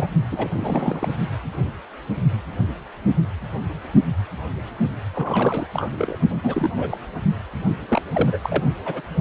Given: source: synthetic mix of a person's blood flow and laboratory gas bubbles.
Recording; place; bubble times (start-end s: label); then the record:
Doppler ultrasound of blood flow; precordium
0.00-0.09 s: bubbles
0.31-0.47 s: bubbles
0.54-1.08 s: bubbles
5.14-5.67 s: bubbles
5.73-5.89 s: bubbles
5.97-6.19 s: bubbles
6.29-6.37 s: bubbles
6.43-6.70 s: bubbles
6.74-6.98 s: bubbles
7.88-8.01 s: bubbles
8.12-8.38 s: bubbles
8.42-8.72 s: bubbles
8.85-9.01 s: bubbles
From the record:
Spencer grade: 3 (all of the cardiac periods contain showers or single bubble signals, but not dominating or overriding the cardiac motion signals); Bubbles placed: only in the low amplitude regions of the cardiac cycle